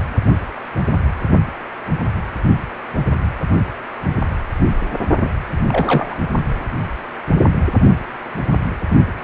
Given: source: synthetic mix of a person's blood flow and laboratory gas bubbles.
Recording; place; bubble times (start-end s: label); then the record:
Doppler ultrasound of blood flow; precordium
5.21-5.29 s: bubbles
5.68-6.16 s: bubbles
From the record:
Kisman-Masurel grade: 212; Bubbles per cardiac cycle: several, 3 to 8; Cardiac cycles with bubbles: 1 to 10%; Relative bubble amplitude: moderate (0.250 to 0.450); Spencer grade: 1 (occasional bubble signal discernible with the cardiac motion signal, with majority of cardiac periods free of bubbles); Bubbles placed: only in the low amplitude regions of the cardiac cycle